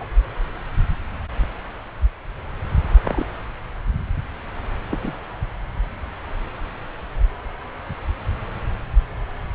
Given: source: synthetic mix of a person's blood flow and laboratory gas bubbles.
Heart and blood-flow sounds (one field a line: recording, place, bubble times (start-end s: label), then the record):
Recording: Doppler ultrasound of blood flow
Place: subclavian vein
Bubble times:
0.00-0.06 s: bubbles
3.04-3.26 s: bubbles
4.91-5.12 s: bubbles
From the record:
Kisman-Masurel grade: 121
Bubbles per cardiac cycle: 1 to 2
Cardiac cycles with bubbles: 10 to 50%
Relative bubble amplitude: barely perceptible (0.100 to 0.250)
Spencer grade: 2 (many but less than half of the cardiac periods contain bubble signals, singularly or in groups)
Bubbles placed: anywhere in the cardiac cycle